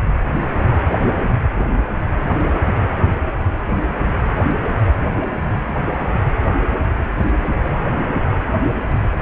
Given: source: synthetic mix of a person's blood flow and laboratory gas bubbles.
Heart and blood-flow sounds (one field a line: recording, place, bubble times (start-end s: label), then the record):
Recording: Doppler ultrasound of blood flow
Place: precordium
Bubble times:
no bubbles
From the record:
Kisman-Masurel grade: 000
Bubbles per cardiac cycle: 0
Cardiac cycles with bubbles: 0%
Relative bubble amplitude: no bubbles discernible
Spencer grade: 0 (complete lack of bubble signals)